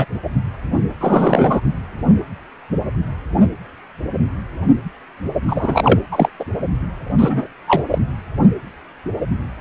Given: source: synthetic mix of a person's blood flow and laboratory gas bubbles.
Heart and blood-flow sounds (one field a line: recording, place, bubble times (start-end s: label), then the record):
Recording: Doppler ultrasound of blood flow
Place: precordium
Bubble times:
0.00-0.05 s: bubbles
1.00-1.61 s: bubbles
5.47-5.99 s: bubbles
6.11-6.29 s: bubbles
6.39-6.45 s: bubbles
7.18-7.47 s: bubbles
7.67-7.83 s: bubbles
7.90-7.98 s: bubbles
From the record:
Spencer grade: 2 (many but less than half of the cardiac periods contain bubble signals, singularly or in groups)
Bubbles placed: anywhere in the cardiac cycle